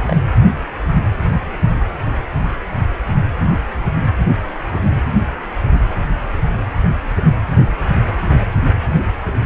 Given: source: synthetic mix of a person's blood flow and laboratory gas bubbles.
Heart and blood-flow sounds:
Doppler ultrasound of blood flow; precordium
0.00-0.03 s: bubbles
0.06-0.17 s: bubbles
From the record:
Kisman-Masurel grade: 212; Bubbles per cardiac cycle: several, 3 to 8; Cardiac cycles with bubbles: 1 to 10%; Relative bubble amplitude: moderate (0.250 to 0.450); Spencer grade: 1 (occasional bubble signal discernible with the cardiac motion signal, with majority of cardiac periods free of bubbles); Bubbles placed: anywhere in the cardiac cycle

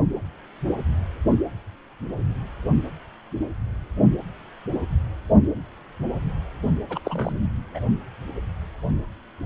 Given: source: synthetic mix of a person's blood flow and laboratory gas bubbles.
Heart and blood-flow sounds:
Doppler ultrasound of blood flow; precordium
6.90-7.00 s: bubbles
7.04-7.39 s: bubbles
7.74-7.80 s: bubbles
From the record:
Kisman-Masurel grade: 211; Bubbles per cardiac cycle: several, 3 to 8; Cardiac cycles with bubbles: 1 to 10%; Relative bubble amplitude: barely perceptible (0.100 to 0.250); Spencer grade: 1 (occasional bubble signal discernible with the cardiac motion signal, with majority of cardiac periods free of bubbles); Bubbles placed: only in the low amplitude regions of the cardiac cycle

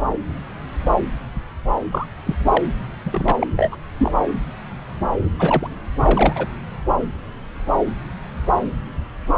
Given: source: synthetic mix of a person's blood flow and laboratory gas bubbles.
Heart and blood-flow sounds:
Doppler ultrasound of blood flow; subclavian vein
1.91-2.07 s: bubbles
2.25-2.35 s: bubbles
2.49-2.62 s: bubbles
3.05-3.47 s: bubbles
3.56-3.76 s: bubbles
3.98-4.14 s: bubbles
5.39-5.70 s: bubbles
6.03-6.46 s: bubbles
From the record:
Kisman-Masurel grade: 223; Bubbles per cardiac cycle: several, 3 to 8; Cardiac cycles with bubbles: 10 to 50%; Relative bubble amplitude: loud (0.450 to 0.775); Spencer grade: 2 (many but less than half of the cardiac periods contain bubble signals, singularly or in groups); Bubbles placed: anywhere in the cardiac cycle

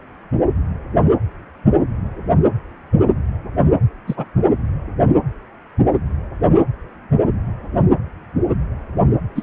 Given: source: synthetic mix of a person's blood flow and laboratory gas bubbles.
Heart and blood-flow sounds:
Doppler ultrasound of blood flow; precordium
4.07-4.25 s: bubbles
9.35-9.43 s: bubbles
From the record:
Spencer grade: 1 (occasional bubble signal discernible with the cardiac motion signal, with majority of cardiac periods free of bubbles); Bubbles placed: anywhere in the cardiac cycle

